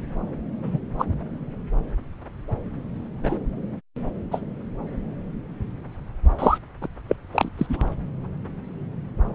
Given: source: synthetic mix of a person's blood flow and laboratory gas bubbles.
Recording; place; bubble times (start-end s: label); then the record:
Doppler ultrasound of blood flow; subclavian vein
0.62-0.78 s: bubbles
0.98-1.05 s: bubbles
3.23-3.38 s: bubbles
4.31-4.41 s: bubbles
6.38-6.58 s: bubbles
6.80-6.88 s: bubbles
7.08-7.16 s: bubbles
7.32-7.48 s: bubbles
7.57-7.66 s: bubbles
7.69-7.89 s: bubbles
From the record:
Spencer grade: 2 (many but less than half of the cardiac periods contain bubble signals, singularly or in groups); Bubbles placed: anywhere in the cardiac cycle